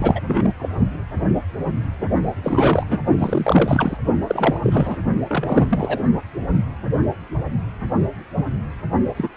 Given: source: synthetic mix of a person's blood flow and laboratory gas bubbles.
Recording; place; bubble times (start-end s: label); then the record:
Doppler ultrasound of blood flow; precordium
0.00-0.20 s: bubbles
0.25-0.54 s: bubbles
0.59-0.69 s: bubbles
2.42-2.86 s: bubbles
2.90-2.99 s: bubbles
3.19-3.97 s: bubbles
4.29-4.58 s: bubbles
4.63-4.98 s: bubbles
5.27-6.00 s: bubbles
9.16-9.29 s: bubbles
From the record:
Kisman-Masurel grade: 332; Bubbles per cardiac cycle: rolling drumbeat, 9 or more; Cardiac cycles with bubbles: 50 to 99%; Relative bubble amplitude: moderate (0.250 to 0.450); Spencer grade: 3 (all of the cardiac periods contain showers or single bubble signals, but not dominating or overriding the cardiac motion signals); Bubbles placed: only in the low amplitude regions of the cardiac cycle